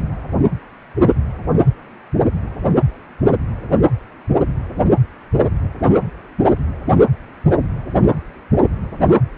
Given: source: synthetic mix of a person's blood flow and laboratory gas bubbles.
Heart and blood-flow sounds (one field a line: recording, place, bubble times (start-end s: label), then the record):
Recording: Doppler ultrasound of blood flow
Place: precordium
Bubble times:
no bubbles
From the record:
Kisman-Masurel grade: 000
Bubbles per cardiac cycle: 0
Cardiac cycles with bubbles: 0%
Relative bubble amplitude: no bubbles discernible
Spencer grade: 0 (complete lack of bubble signals)